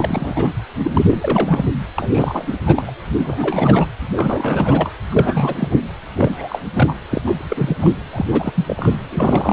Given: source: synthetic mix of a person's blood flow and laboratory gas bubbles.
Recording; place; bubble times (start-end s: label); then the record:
Doppler ultrasound of blood flow; precordium
0.00-0.56 s: bubbles
0.83-1.66 s: bubbles
1.98-2.54 s: bubbles
2.66-2.91 s: bubbles
3.20-3.88 s: bubbles
4.12-4.90 s: bubbles
5.11-5.54 s: bubbles
5.60-5.79 s: bubbles
6.17-6.59 s: bubbles
6.75-6.95 s: bubbles
7.11-7.21 s: bubbles
7.25-7.77 s: bubbles
7.80-8.03 s: bubbles
8.13-8.25 s: bubbles
8.29-8.97 s: bubbles
9.09-9.53 s: bubbles
From the record:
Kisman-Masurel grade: 342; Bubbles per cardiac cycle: rolling drumbeat, 9 or more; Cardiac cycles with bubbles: 100%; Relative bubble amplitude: moderate (0.250 to 0.450); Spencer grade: 3 (all of the cardiac periods contain showers or single bubble signals, but not dominating or overriding the cardiac motion signals); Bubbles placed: anywhere in the cardiac cycle